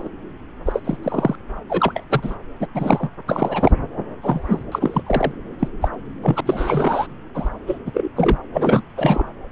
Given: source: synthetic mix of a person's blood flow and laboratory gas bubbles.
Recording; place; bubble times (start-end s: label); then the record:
Doppler ultrasound of blood flow; subclavian vein
0.00-0.09 s: bubbles
0.65-0.80 s: bubbles
0.84-0.97 s: bubbles
1.02-1.35 s: bubbles
1.69-2.03 s: bubbles
2.10-2.35 s: bubbles
2.60-2.67 s: bubbles
2.75-3.10 s: bubbles
3.27-3.72 s: bubbles
4.22-4.63 s: bubbles
4.71-5.03 s: bubbles
5.06-5.31 s: bubbles
5.59-5.68 s: bubbles
5.81-5.88 s: bubbles
6.22-6.40 s: bubbles
6.46-7.07 s: bubbles
7.34-7.48 s: bubbles
7.67-7.78 s: bubbles
7.86-7.91 s: bubbles
7.94-8.08 s: bubbles
8.16-8.37 s: bubbles
8.53-8.82 s: bubbles
8.96-9.28 s: bubbles
From the record:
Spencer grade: 3 (all of the cardiac periods contain showers or single bubble signals, but not dominating or overriding the cardiac motion signals); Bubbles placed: anywhere in the cardiac cycle